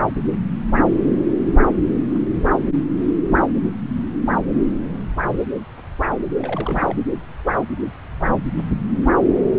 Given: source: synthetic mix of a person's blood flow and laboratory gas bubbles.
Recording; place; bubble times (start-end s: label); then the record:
Doppler ultrasound of blood flow; subclavian vein
6.38-6.96 s: bubbles
From the record:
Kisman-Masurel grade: 211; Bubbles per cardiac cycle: several, 3 to 8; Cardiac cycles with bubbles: 1 to 10%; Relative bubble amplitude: barely perceptible (0.100 to 0.250); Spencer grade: 1 (occasional bubble signal discernible with the cardiac motion signal, with majority of cardiac periods free of bubbles); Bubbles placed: anywhere in the cardiac cycle